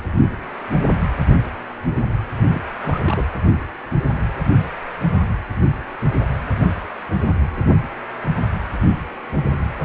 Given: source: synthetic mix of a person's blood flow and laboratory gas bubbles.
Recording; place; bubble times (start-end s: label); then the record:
Doppler ultrasound of blood flow; precordium
2.49-2.62 s: bubbles
2.82-3.00 s: bubbles
3.04-3.25 s: bubbles
From the record:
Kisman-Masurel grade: 211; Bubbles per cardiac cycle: several, 3 to 8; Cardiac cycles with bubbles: 1 to 10%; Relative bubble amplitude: barely perceptible (0.100 to 0.250); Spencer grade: 1 (occasional bubble signal discernible with the cardiac motion signal, with majority of cardiac periods free of bubbles); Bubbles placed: anywhere in the cardiac cycle